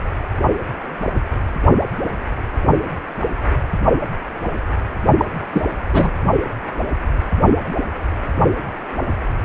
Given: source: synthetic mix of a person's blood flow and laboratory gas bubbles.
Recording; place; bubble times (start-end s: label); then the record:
Doppler ultrasound of blood flow; precordium
5.18-5.25 s: bubbles
5.52-5.65 s: bubbles
5.93-6.10 s: bubbles
From the record:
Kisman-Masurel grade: 213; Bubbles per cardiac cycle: several, 3 to 8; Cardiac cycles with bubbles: 1 to 10%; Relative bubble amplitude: loud (0.450 to 0.775); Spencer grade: 1 (occasional bubble signal discernible with the cardiac motion signal, with majority of cardiac periods free of bubbles); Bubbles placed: only in the low amplitude regions of the cardiac cycle